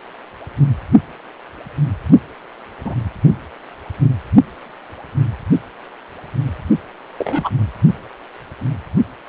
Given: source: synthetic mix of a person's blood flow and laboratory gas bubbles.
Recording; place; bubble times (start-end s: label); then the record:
Doppler ultrasound of blood flow; precordium
2.85-2.95 s: bubbles
7.18-7.50 s: bubbles
From the record:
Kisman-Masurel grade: 122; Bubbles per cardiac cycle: 1 to 2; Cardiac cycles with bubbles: 10 to 50%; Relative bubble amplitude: moderate (0.250 to 0.450); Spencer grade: 2 (many but less than half of the cardiac periods contain bubble signals, singularly or in groups); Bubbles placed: anywhere in the cardiac cycle